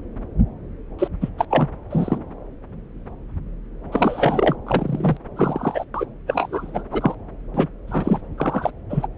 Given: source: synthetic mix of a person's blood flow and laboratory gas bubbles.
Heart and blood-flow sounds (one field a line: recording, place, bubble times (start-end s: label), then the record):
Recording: Doppler ultrasound of blood flow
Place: subclavian vein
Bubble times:
0.98-1.08 s: bubbles
1.21-1.29 s: bubbles
1.38-1.45 s: bubbles
1.50-1.69 s: bubbles
1.90-2.18 s: bubbles
3.91-4.56 s: bubbles
4.67-5.17 s: bubbles
5.36-5.85 s: bubbles
5.94-6.06 s: bubbles
6.27-6.83 s: bubbles
6.92-7.15 s: bubbles
7.54-7.67 s: bubbles
7.88-8.21 s: bubbles
8.38-8.71 s: bubbles
8.89-9.08 s: bubbles
From the record:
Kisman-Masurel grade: 332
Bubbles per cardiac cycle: rolling drumbeat, 9 or more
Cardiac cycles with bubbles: 50 to 99%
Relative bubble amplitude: moderate (0.250 to 0.450)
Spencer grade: 3 (all of the cardiac periods contain showers or single bubble signals, but not dominating or overriding the cardiac motion signals)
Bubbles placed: anywhere in the cardiac cycle